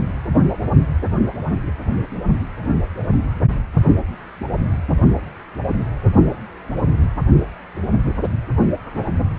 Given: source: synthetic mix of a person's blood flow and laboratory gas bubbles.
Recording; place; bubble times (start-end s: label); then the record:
Doppler ultrasound of blood flow; precordium
no bubbles
From the record:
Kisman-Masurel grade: 000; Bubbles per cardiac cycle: 0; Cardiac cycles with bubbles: 0%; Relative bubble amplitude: no bubbles discernible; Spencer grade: 0 (complete lack of bubble signals)